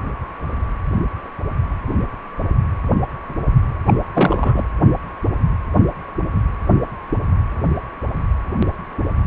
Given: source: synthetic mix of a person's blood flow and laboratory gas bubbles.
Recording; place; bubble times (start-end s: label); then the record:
Doppler ultrasound of blood flow; precordium
3.87-3.94 s: bubbles
4.13-4.65 s: bubbles
From the record:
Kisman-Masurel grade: 212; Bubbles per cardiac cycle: several, 3 to 8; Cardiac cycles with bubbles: 1 to 10%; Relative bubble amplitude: moderate (0.250 to 0.450); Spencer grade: 1 (occasional bubble signal discernible with the cardiac motion signal, with majority of cardiac periods free of bubbles); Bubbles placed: anywhere in the cardiac cycle